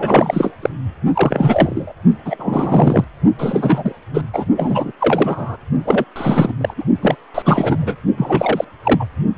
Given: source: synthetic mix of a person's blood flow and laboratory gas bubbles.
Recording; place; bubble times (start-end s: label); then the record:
Doppler ultrasound of blood flow; precordium
0.00-0.53 s: bubbles
0.61-0.69 s: bubbles
1.14-1.93 s: bubbles
2.25-3.04 s: bubbles
3.38-3.93 s: bubbles
4.13-4.21 s: bubbles
4.33-4.44 s: bubbles
4.57-4.92 s: bubbles
5.00-5.56 s: bubbles
5.85-6.04 s: bubbles
6.15-6.52 s: bubbles
6.60-6.74 s: bubbles
6.77-6.84 s: bubbles
7.01-7.16 s: bubbles
7.34-7.42 s: bubbles
7.44-7.97 s: bubbles
8.17-8.64 s: bubbles
8.84-9.06 s: bubbles
From the record:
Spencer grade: 3 (all of the cardiac periods contain showers or single bubble signals, but not dominating or overriding the cardiac motion signals); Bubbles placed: only in the low amplitude regions of the cardiac cycle